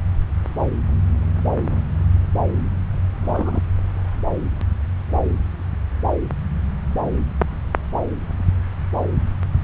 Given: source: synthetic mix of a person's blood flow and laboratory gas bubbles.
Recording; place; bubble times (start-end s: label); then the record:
Doppler ultrasound of blood flow; subclavian vein
3.20-3.62 s: bubbles
From the record:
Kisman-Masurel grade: 111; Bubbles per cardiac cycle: 1 to 2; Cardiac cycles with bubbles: 1 to 10%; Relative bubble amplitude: barely perceptible (0.100 to 0.250); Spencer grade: 1 (occasional bubble signal discernible with the cardiac motion signal, with majority of cardiac periods free of bubbles); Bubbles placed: anywhere in the cardiac cycle